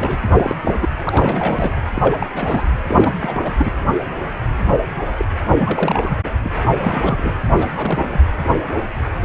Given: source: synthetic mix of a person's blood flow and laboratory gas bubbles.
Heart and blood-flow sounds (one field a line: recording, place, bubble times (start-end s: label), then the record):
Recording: Doppler ultrasound of blood flow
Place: precordium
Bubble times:
0.00-0.17 s: bubbles
0.25-0.55 s: bubbles
0.64-0.89 s: bubbles
1.05-1.81 s: bubbles
1.95-2.27 s: bubbles
2.33-2.68 s: bubbles
2.87-3.15 s: bubbles
3.21-3.73 s: bubbles
5.17-5.25 s: bubbles
5.58-6.17 s: bubbles
6.25-6.30 s: bubbles
6.44-6.52 s: bubbles
6.57-6.62 s: bubbles
6.75-7.33 s: bubbles
7.49-7.67 s: bubbles
7.71-8.21 s: bubbles
From the record:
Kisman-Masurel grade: 332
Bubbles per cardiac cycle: rolling drumbeat, 9 or more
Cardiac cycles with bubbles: 50 to 99%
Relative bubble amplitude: moderate (0.250 to 0.450)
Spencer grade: 3 (all of the cardiac periods contain showers or single bubble signals, but not dominating or overriding the cardiac motion signals)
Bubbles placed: anywhere in the cardiac cycle